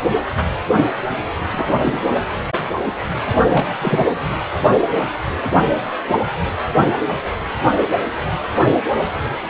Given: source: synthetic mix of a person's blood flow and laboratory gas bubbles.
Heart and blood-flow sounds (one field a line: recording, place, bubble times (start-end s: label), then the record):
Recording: Doppler ultrasound of blood flow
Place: precordium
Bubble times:
1.52-2.01 s: bubbles
3.42-4.04 s: bubbles
From the record:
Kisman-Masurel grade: 222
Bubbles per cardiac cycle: several, 3 to 8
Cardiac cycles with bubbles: 10 to 50%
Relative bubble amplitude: moderate (0.250 to 0.450)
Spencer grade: 2 (many but less than half of the cardiac periods contain bubble signals, singularly or in groups)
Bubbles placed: anywhere in the cardiac cycle